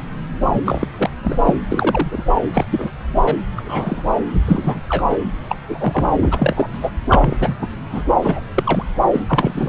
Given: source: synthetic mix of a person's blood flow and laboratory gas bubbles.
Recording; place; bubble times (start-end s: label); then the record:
Doppler ultrasound of blood flow; subclavian vein
0.52-0.88 s: bubbles
0.97-1.10 s: bubbles
1.24-1.36 s: bubbles
1.45-1.55 s: bubbles
1.70-2.23 s: bubbles
2.54-2.65 s: bubbles
2.71-2.91 s: bubbles
3.16-3.37 s: bubbles
3.56-4.04 s: bubbles
4.46-4.80 s: bubbles
4.89-5.17 s: bubbles
5.50-5.55 s: bubbles
5.68-6.04 s: bubbles
6.21-6.70 s: bubbles
6.72-6.91 s: bubbles
7.08-7.37 s: bubbles
7.41-7.55 s: bubbles
7.62-7.67 s: bubbles
7.92-8.03 s: bubbles
8.22-8.40 s: bubbles
8.54-8.85 s: bubbles
9.12-9.20 s: bubbles
9.28-9.69 s: bubbles
From the record:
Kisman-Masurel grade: 242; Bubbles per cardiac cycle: several, 3 to 8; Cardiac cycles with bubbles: 100%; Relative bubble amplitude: moderate (0.250 to 0.450); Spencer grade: 3 (all of the cardiac periods contain showers or single bubble signals, but not dominating or overriding the cardiac motion signals); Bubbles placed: anywhere in the cardiac cycle